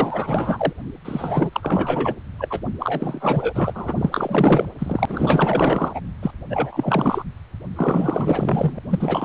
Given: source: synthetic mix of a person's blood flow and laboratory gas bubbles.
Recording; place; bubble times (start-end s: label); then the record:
Doppler ultrasound of blood flow; precordium
0.00-0.73 s: bubbles
1.04-2.15 s: bubbles
2.38-2.62 s: bubbles
2.79-3.94 s: bubbles
3.98-4.69 s: bubbles
4.79-5.06 s: bubbles
5.08-6.01 s: bubbles
6.22-6.32 s: bubbles
6.50-7.24 s: bubbles
7.75-8.79 s: bubbles
8.89-9.25 s: bubbles
From the record:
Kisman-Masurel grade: 444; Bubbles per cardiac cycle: continuous sound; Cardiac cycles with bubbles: 100%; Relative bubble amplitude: maximal (0.775 to 0.999); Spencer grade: 4 (maximum detectable bubble signal sounding continuously throughout systole and diastole of every cardiac period, and overriding the amplitude of the normal cardiac signals); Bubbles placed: anywhere in the cardiac cycle